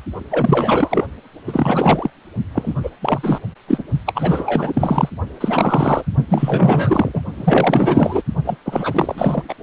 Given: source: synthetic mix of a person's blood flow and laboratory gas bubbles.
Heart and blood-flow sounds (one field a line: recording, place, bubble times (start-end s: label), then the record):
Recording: Doppler ultrasound of blood flow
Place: precordium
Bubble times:
0.30-1.06 s: bubbles
1.47-2.10 s: bubbles
2.53-2.74 s: bubbles
2.83-2.90 s: bubbles
3.01-3.39 s: bubbles
3.68-3.83 s: bubbles
4.06-5.09 s: bubbles
5.40-6.03 s: bubbles
6.29-7.21 s: bubbles
7.37-8.22 s: bubbles
8.44-8.57 s: bubbles
8.65-9.42 s: bubbles
9.48-9.54 s: bubbles
From the record:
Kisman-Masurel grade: 444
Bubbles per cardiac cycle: continuous sound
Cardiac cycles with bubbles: 100%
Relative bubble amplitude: maximal (0.775 to 0.999)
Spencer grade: 4 (maximum detectable bubble signal sounding continuously throughout systole and diastole of every cardiac period, and overriding the amplitude of the normal cardiac signals)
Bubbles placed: only in the low amplitude regions of the cardiac cycle